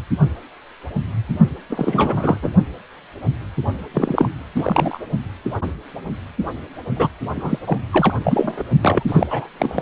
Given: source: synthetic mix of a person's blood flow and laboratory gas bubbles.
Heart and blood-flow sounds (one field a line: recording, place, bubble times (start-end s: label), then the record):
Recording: Doppler ultrasound of blood flow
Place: precordium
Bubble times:
1.69-2.38 s: bubbles
2.42-2.50 s: bubbles
3.94-4.29 s: bubbles
4.55-4.99 s: bubbles
6.96-7.08 s: bubbles
7.35-7.58 s: bubbles
7.67-7.79 s: bubbles
7.92-8.12 s: bubbles
8.23-8.63 s: bubbles
8.82-9.03 s: bubbles
9.07-9.48 s: bubbles
9.59-9.82 s: bubbles
From the record:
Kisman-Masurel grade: 333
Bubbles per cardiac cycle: rolling drumbeat, 9 or more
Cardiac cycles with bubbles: 50 to 99%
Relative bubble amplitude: loud (0.450 to 0.775)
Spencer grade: 3 (all of the cardiac periods contain showers or single bubble signals, but not dominating or overriding the cardiac motion signals)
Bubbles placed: only in the low amplitude regions of the cardiac cycle